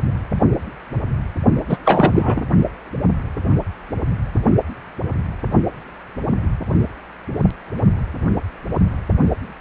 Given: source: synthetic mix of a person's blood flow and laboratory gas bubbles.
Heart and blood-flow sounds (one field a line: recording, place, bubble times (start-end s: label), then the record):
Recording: Doppler ultrasound of blood flow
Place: precordium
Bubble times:
1.69-1.77 s: bubbles
1.85-2.42 s: bubbles
From the record:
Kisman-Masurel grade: 213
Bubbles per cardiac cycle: several, 3 to 8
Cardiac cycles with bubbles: 1 to 10%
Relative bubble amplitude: loud (0.450 to 0.775)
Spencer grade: 1 (occasional bubble signal discernible with the cardiac motion signal, with majority of cardiac periods free of bubbles)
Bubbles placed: only in the low amplitude regions of the cardiac cycle